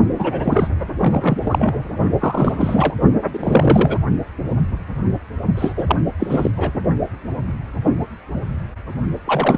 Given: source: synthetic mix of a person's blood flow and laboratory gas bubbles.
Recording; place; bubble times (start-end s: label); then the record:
Doppler ultrasound of blood flow; precordium
0.18-0.70 s: bubbles
0.99-1.84 s: bubbles
2.20-2.95 s: bubbles
3.33-3.98 s: bubbles
5.57-5.73 s: bubbles
5.76-5.96 s: bubbles
6.20-6.51 s: bubbles
6.57-6.71 s: bubbles
9.24-9.58 s: bubbles
From the record:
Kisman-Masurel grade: 333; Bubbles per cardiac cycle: rolling drumbeat, 9 or more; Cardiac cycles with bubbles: 50 to 99%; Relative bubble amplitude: loud (0.450 to 0.775); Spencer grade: 3 (all of the cardiac periods contain showers or single bubble signals, but not dominating or overriding the cardiac motion signals); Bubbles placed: only in the low amplitude regions of the cardiac cycle